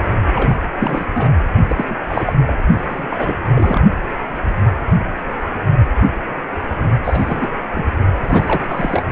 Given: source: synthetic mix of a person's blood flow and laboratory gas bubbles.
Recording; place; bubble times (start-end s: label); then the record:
Doppler ultrasound of blood flow; precordium
0.35-0.54 s: bubbles
0.79-1.06 s: bubbles
1.15-1.29 s: bubbles
1.68-1.84 s: bubbles
1.87-1.95 s: bubbles
2.08-2.33 s: bubbles
2.47-2.54 s: bubbles
2.90-3.35 s: bubbles
3.46-3.83 s: bubbles
7.04-7.49 s: bubbles
7.71-7.85 s: bubbles
8.24-9.03 s: bubbles
From the record:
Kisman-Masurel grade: 332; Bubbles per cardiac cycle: rolling drumbeat, 9 or more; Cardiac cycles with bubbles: 50 to 99%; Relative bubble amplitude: moderate (0.250 to 0.450); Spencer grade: 3 (all of the cardiac periods contain showers or single bubble signals, but not dominating or overriding the cardiac motion signals); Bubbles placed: only in the low amplitude regions of the cardiac cycle